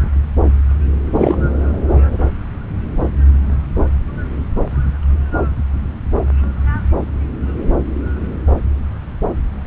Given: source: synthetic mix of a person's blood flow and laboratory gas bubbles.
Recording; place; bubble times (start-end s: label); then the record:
Doppler ultrasound of blood flow; subclavian vein
1.14-1.36 s: bubbles
From the record:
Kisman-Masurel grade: 213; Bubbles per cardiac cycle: several, 3 to 8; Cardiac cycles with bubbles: 1 to 10%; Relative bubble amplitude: loud (0.450 to 0.775); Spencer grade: 1 (occasional bubble signal discernible with the cardiac motion signal, with majority of cardiac periods free of bubbles); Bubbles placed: anywhere in the cardiac cycle